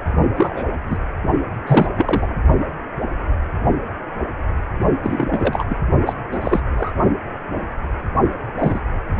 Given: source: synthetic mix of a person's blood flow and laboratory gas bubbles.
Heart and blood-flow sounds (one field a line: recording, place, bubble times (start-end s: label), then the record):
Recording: Doppler ultrasound of blood flow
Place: precordium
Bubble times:
0.36-0.66 s: bubbles
0.90-0.98 s: bubbles
1.67-1.86 s: bubbles
1.97-2.27 s: bubbles
5.03-5.66 s: bubbles
5.69-5.77 s: bubbles
6.06-6.13 s: bubbles
6.32-6.39 s: bubbles
6.41-6.60 s: bubbles
6.77-6.93 s: bubbles
8.59-8.81 s: bubbles
From the record:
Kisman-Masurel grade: 233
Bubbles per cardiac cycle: several, 3 to 8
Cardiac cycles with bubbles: 50 to 99%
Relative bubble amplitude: loud (0.450 to 0.775)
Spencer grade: 3 (all of the cardiac periods contain showers or single bubble signals, but not dominating or overriding the cardiac motion signals)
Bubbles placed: only in the low amplitude regions of the cardiac cycle